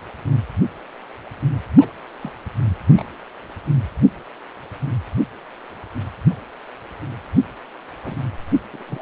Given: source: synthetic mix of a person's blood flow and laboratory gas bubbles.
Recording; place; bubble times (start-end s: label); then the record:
Doppler ultrasound of blood flow; precordium
1.80-1.92 s: bubbles
2.20-2.33 s: bubbles
2.88-3.05 s: bubbles
3.10-3.17 s: bubbles
8.04-8.20 s: bubbles
8.73-8.83 s: bubbles
8.88-9.02 s: bubbles
From the record:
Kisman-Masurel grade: 121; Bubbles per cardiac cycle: 1 to 2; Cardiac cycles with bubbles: 10 to 50%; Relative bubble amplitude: barely perceptible (0.100 to 0.250); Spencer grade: 2 (many but less than half of the cardiac periods contain bubble signals, singularly or in groups); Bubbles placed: anywhere in the cardiac cycle